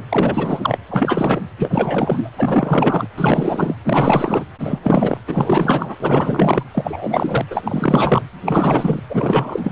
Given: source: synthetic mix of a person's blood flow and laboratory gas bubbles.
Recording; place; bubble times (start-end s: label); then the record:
Doppler ultrasound of blood flow; precordium
0.09-0.78 s: bubbles
0.90-1.41 s: bubbles
1.57-2.30 s: bubbles
2.38-3.08 s: bubbles
3.17-3.75 s: bubbles
3.84-4.44 s: bubbles
4.59-5.18 s: bubbles
5.27-5.96 s: bubbles
6.00-6.63 s: bubbles
6.73-7.46 s: bubbles
7.50-7.62 s: bubbles
7.64-8.24 s: bubbles
8.46-9.00 s: bubbles
9.09-9.72 s: bubbles
From the record:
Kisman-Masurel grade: 444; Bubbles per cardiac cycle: continuous sound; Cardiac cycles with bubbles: 100%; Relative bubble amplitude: maximal (0.775 to 0.999); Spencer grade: 4 (maximum detectable bubble signal sounding continuously throughout systole and diastole of every cardiac period, and overriding the amplitude of the normal cardiac signals); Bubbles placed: anywhere in the cardiac cycle